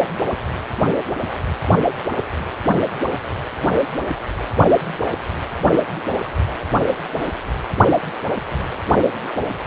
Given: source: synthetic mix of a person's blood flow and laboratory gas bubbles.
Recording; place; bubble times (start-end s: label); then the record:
Doppler ultrasound of blood flow; precordium
6.24-6.30 s: bubbles
6.42-6.58 s: bubbles
From the record:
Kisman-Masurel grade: 211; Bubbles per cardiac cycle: several, 3 to 8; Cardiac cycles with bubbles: 1 to 10%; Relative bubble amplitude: barely perceptible (0.100 to 0.250); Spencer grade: 1 (occasional bubble signal discernible with the cardiac motion signal, with majority of cardiac periods free of bubbles); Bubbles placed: only in the low amplitude regions of the cardiac cycle